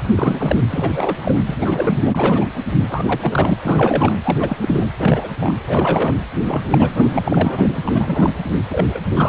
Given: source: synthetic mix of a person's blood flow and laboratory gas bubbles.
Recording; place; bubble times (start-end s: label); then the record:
Doppler ultrasound of blood flow; precordium
0.04-0.07 s: bubbles
0.16-0.56 s: bubbles
0.70-1.33 s: bubbles
1.47-1.99 s: bubbles
2.05-2.45 s: bubbles
2.90-3.54 s: bubbles
3.62-4.18 s: bubbles
4.25-4.57 s: bubbles
4.62-4.87 s: bubbles
4.99-5.29 s: bubbles
5.40-5.53 s: bubbles
5.67-6.14 s: bubbles
6.46-6.62 s: bubbles
6.70-8.32 s: bubbles
8.54-8.60 s: bubbles
8.70-9.00 s: bubbles
9.12-9.28 s: bubbles
From the record:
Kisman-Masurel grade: 342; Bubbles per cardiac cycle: rolling drumbeat, 9 or more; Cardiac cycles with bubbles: 100%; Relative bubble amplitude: moderate (0.250 to 0.450); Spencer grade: 3 (all of the cardiac periods contain showers or single bubble signals, but not dominating or overriding the cardiac motion signals); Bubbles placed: anywhere in the cardiac cycle